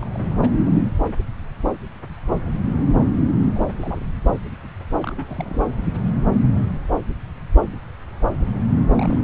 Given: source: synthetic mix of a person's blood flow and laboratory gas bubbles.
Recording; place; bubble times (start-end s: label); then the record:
Doppler ultrasound of blood flow; subclavian vein
0.00-0.09 s: bubbles
0.11-0.26 s: bubbles
0.37-0.53 s: bubbles
0.64-0.82 s: bubbles
3.54-4.04 s: bubbles
5.02-5.64 s: bubbles
8.94-9.24 s: bubbles
From the record:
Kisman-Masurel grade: 221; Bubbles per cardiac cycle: several, 3 to 8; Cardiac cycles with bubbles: 10 to 50%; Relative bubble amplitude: barely perceptible (0.100 to 0.250); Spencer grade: 2 (many but less than half of the cardiac periods contain bubble signals, singularly or in groups); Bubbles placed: anywhere in the cardiac cycle